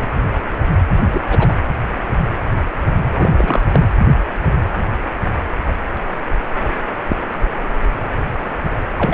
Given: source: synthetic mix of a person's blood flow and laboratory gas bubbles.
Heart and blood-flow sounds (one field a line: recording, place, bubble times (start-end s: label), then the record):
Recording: Doppler ultrasound of blood flow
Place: precordium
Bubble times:
1.05-1.55 s: bubbles
3.17-3.64 s: bubbles
3.71-3.81 s: bubbles
8.96-9.14 s: bubbles
From the record:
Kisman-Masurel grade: 222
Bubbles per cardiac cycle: several, 3 to 8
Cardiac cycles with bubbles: 10 to 50%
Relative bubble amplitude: moderate (0.250 to 0.450)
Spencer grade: 2 (many but less than half of the cardiac periods contain bubble signals, singularly or in groups)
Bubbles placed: anywhere in the cardiac cycle